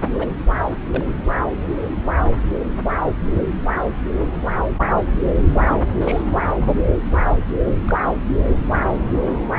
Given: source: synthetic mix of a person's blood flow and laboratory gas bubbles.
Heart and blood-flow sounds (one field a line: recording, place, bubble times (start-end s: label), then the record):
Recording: Doppler ultrasound of blood flow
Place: subclavian vein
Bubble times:
0.04-0.09 s: bubbles
0.11-0.30 s: bubbles
0.94-1.04 s: bubbles
6.01-6.23 s: bubbles
6.30-6.41 s: bubbles
7.87-7.95 s: bubbles
8.85-8.92 s: bubbles
From the record:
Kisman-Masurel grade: 122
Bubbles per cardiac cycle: 1 to 2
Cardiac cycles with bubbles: 10 to 50%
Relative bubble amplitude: moderate (0.250 to 0.450)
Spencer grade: 2 (many but less than half of the cardiac periods contain bubble signals, singularly or in groups)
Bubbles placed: anywhere in the cardiac cycle